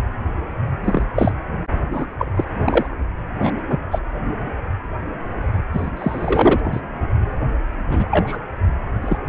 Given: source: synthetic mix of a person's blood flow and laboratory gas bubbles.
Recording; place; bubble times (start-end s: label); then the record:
Doppler ultrasound of blood flow; precordium
0.84-1.03 s: bubbles
1.16-1.32 s: bubbles
1.91-2.07 s: bubbles
2.18-2.32 s: bubbles
2.35-2.44 s: bubbles
2.62-2.87 s: bubbles
3.40-3.51 s: bubbles
3.70-3.78 s: bubbles
3.90-3.99 s: bubbles
5.73-5.90 s: bubbles
5.96-6.59 s: bubbles
6.63-6.80 s: bubbles
7.87-8.37 s: bubbles
9.02-9.18 s: bubbles
From the record:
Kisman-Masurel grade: 232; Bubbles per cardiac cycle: several, 3 to 8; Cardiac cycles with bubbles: 50 to 99%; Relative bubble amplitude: moderate (0.250 to 0.450); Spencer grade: 3 (all of the cardiac periods contain showers or single bubble signals, but not dominating or overriding the cardiac motion signals); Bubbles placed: only in the low amplitude regions of the cardiac cycle